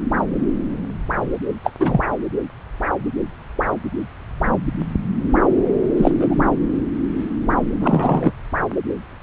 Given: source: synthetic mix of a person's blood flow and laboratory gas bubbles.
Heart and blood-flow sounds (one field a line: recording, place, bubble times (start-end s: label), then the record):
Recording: Doppler ultrasound of blood flow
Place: subclavian vein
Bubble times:
1.64-1.72 s: bubbles
1.79-2.04 s: bubbles
5.97-6.49 s: bubbles
7.79-8.32 s: bubbles
From the record:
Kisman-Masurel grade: 223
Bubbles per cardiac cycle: several, 3 to 8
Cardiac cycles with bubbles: 10 to 50%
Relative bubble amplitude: loud (0.450 to 0.775)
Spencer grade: 2 (many but less than half of the cardiac periods contain bubble signals, singularly or in groups)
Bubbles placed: anywhere in the cardiac cycle